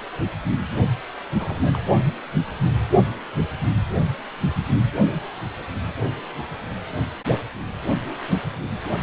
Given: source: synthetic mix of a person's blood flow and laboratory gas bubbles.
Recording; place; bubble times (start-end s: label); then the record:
Doppler ultrasound of blood flow; precordium
1.38-1.79 s: bubbles
From the record:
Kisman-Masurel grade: 221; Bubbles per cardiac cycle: several, 3 to 8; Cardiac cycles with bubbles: 10 to 50%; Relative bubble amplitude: barely perceptible (0.100 to 0.250); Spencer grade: 2 (many but less than half of the cardiac periods contain bubble signals, singularly or in groups); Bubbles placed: only in the low amplitude regions of the cardiac cycle